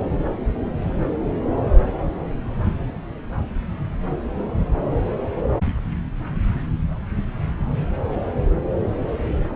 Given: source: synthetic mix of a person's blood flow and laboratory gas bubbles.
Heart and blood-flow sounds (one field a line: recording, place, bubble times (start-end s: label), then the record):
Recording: Doppler ultrasound of blood flow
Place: subclavian vein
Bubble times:
no bubbles
From the record:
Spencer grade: 0 (complete lack of bubble signals)